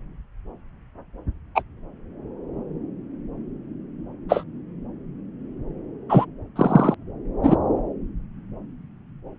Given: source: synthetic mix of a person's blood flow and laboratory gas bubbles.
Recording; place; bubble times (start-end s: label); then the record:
Doppler ultrasound of blood flow; subclavian vein
1.55-1.62 s: bubbles
4.28-4.43 s: bubbles
6.09-6.25 s: bubbles
6.55-6.94 s: bubbles
7.42-7.56 s: bubbles
From the record:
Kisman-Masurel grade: 123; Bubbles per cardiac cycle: 1 to 2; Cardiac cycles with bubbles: 10 to 50%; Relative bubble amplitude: loud (0.450 to 0.775); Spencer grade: 2 (many but less than half of the cardiac periods contain bubble signals, singularly or in groups); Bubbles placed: anywhere in the cardiac cycle